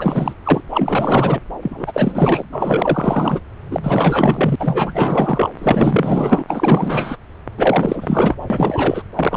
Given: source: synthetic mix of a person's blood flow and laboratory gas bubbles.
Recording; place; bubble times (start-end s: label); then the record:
Doppler ultrasound of blood flow; subclavian vein
0.00-0.35 s: bubbles
0.43-0.61 s: bubbles
0.70-1.40 s: bubbles
1.61-2.45 s: bubbles
2.52-3.40 s: bubbles
3.70-3.80 s: bubbles
3.83-4.55 s: bubbles
4.59-5.50 s: bubbles
5.58-6.43 s: bubbles
6.47-7.16 s: bubbles
7.58-8.35 s: bubbles
8.50-9.03 s: bubbles
9.16-9.37 s: bubbles
From the record:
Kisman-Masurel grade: 444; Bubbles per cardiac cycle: continuous sound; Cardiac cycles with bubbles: 100%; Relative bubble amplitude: maximal (0.775 to 0.999); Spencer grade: 4 (maximum detectable bubble signal sounding continuously throughout systole and diastole of every cardiac period, and overriding the amplitude of the normal cardiac signals); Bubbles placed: anywhere in the cardiac cycle